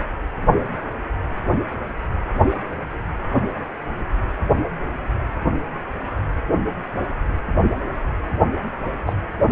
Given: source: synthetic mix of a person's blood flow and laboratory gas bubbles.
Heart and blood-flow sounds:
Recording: Doppler ultrasound of blood flow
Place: precordium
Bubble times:
9.06-9.13 s: bubbles
From the record:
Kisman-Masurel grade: 122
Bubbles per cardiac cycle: 1 to 2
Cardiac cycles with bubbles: 10 to 50%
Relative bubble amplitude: moderate (0.250 to 0.450)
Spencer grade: 2 (many but less than half of the cardiac periods contain bubble signals, singularly or in groups)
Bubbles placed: anywhere in the cardiac cycle

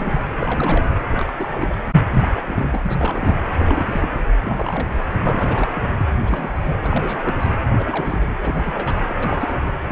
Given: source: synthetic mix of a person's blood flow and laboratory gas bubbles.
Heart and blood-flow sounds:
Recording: Doppler ultrasound of blood flow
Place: precordium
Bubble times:
0.00-0.24 s: bubbles
0.38-0.91 s: bubbles
1.11-1.33 s: bubbles
1.38-1.78 s: bubbles
2.14-2.28 s: bubbles
2.46-2.80 s: bubbles
2.83-3.41 s: bubbles
3.51-4.09 s: bubbles
4.11-4.18 s: bubbles
4.41-4.96 s: bubbles
5.23-6.06 s: bubbles
6.10-6.17 s: bubbles
6.25-6.77 s: bubbles
6.81-7.47 s: bubbles
7.76-8.35 s: bubbles
8.42-9.15 s: bubbles
9.23-9.76 s: bubbles
9.84-9.92 s: bubbles
From the record:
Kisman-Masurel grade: 342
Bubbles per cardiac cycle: rolling drumbeat, 9 or more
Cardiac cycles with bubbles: 100%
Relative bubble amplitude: moderate (0.250 to 0.450)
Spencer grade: 3 (all of the cardiac periods contain showers or single bubble signals, but not dominating or overriding the cardiac motion signals)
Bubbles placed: anywhere in the cardiac cycle

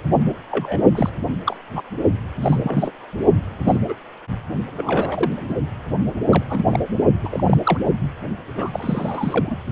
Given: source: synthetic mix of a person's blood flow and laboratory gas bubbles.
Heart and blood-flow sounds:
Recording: Doppler ultrasound of blood flow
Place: precordium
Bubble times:
0.51-0.80 s: bubbles
0.95-1.10 s: bubbles
1.46-1.56 s: bubbles
1.75-1.83 s: bubbles
2.42-2.92 s: bubbles
3.63-3.79 s: bubbles
3.88-3.95 s: bubbles
4.77-5.33 s: bubbles
5.49-5.56 s: bubbles
6.27-6.44 s: bubbles
6.49-6.79 s: bubbles
7.24-7.58 s: bubbles
7.63-7.78 s: bubbles
8.56-9.56 s: bubbles
From the record:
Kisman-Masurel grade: 242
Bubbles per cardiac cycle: several, 3 to 8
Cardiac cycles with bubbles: 100%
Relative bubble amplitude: moderate (0.250 to 0.450)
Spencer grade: 3 (all of the cardiac periods contain showers or single bubble signals, but not dominating or overriding the cardiac motion signals)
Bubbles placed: only in the low amplitude regions of the cardiac cycle

